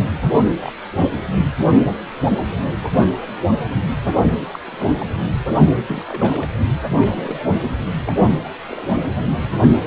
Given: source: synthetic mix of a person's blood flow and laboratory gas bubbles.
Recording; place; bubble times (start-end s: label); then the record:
Doppler ultrasound of blood flow; precordium
0.24-0.40 s: bubbles
0.52-0.71 s: bubbles
0.96-1.08 s: bubbles
4.06-4.32 s: bubbles
4.52-4.59 s: bubbles
4.67-5.06 s: bubbles
5.88-6.03 s: bubbles
6.08-6.49 s: bubbles
6.88-7.45 s: bubbles
7.48-7.75 s: bubbles
8.04-8.13 s: bubbles
8.17-8.30 s: bubbles
8.44-8.49 s: bubbles
8.68-8.97 s: bubbles
From the record:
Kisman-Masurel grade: 221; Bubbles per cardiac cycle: several, 3 to 8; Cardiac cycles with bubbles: 10 to 50%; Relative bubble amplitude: barely perceptible (0.100 to 0.250); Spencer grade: 2 (many but less than half of the cardiac periods contain bubble signals, singularly or in groups); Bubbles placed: anywhere in the cardiac cycle